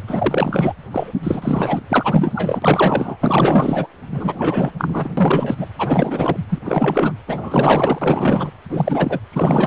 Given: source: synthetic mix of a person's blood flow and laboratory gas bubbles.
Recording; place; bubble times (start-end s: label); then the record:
Doppler ultrasound of blood flow; precordium
0.07-0.72 s: bubbles
0.91-1.12 s: bubbles
1.23-1.80 s: bubbles
1.89-3.17 s: bubbles
3.21-3.87 s: bubbles
4.11-4.72 s: bubbles
4.78-5.13 s: bubbles
5.17-5.67 s: bubbles
5.79-6.37 s: bubbles
6.48-6.58 s: bubbles
6.64-7.12 s: bubbles
7.27-8.50 s: bubbles
8.70-9.19 s: bubbles
9.33-9.67 s: bubbles
From the record:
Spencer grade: 4 (maximum detectable bubble signal sounding continuously throughout systole and diastole of every cardiac period, and overriding the amplitude of the normal cardiac signals); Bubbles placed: anywhere in the cardiac cycle